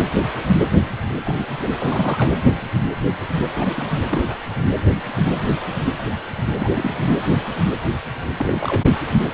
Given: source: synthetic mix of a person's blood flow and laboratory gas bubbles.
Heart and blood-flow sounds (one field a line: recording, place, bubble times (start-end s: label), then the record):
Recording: Doppler ultrasound of blood flow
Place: precordium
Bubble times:
1.25-1.47 s: bubbles
1.60-1.68 s: bubbles
1.79-2.31 s: bubbles
3.58-3.85 s: bubbles
3.90-4.03 s: bubbles
4.09-4.36 s: bubbles
6.57-7.05 s: bubbles
8.37-8.82 s: bubbles
From the record:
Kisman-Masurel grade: 221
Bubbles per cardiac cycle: several, 3 to 8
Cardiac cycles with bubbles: 10 to 50%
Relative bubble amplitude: barely perceptible (0.100 to 0.250)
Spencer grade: 2 (many but less than half of the cardiac periods contain bubble signals, singularly or in groups)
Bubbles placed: anywhere in the cardiac cycle